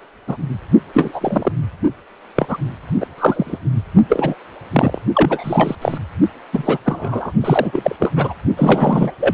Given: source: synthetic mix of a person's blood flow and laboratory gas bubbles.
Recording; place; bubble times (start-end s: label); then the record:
Doppler ultrasound of blood flow; precordium
0.27-0.36 s: bubbles
0.94-1.52 s: bubbles
2.35-2.56 s: bubbles
3.00-3.06 s: bubbles
3.18-3.58 s: bubbles
4.09-4.36 s: bubbles
4.72-4.98 s: bubbles
5.14-5.75 s: bubbles
5.82-5.98 s: bubbles
6.53-6.78 s: bubbles
6.86-7.32 s: bubbles
7.41-7.96 s: bubbles
7.99-8.12 s: bubbles
8.16-8.34 s: bubbles
8.56-9.12 s: bubbles
9.20-9.33 s: bubbles
From the record:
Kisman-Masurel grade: 243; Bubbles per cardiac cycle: several, 3 to 8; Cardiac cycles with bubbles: 100%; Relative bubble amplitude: loud (0.450 to 0.775); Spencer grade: 3 (all of the cardiac periods contain showers or single bubble signals, but not dominating or overriding the cardiac motion signals); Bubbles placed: only in the low amplitude regions of the cardiac cycle